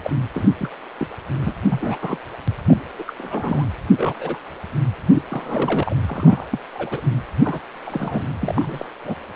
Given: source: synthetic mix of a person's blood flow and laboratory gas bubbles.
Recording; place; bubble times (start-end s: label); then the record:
Doppler ultrasound of blood flow; precordium
0.03-0.10 s: bubbles
0.34-0.49 s: bubbles
0.58-0.69 s: bubbles
1.00-1.07 s: bubbles
1.36-1.54 s: bubbles
1.69-1.99 s: bubbles
2.01-2.17 s: bubbles
2.67-2.81 s: bubbles
2.98-3.03 s: bubbles
3.06-3.12 s: bubbles
3.18-3.64 s: bubbles
3.97-4.14 s: bubbles
4.20-4.38 s: bubbles
5.11-5.22 s: bubbles
5.30-5.96 s: bubbles
6.06-6.47 s: bubbles
6.50-6.59 s: bubbles
6.75-7.00 s: bubbles
7.43-7.60 s: bubbles
7.85-8.24 s: bubbles
8.41-8.86 s: bubbles
9.04-9.14 s: bubbles
From the record:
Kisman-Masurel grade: 242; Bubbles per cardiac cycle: several, 3 to 8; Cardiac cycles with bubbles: 100%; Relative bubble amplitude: moderate (0.250 to 0.450); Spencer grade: 3 (all of the cardiac periods contain showers or single bubble signals, but not dominating or overriding the cardiac motion signals); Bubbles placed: anywhere in the cardiac cycle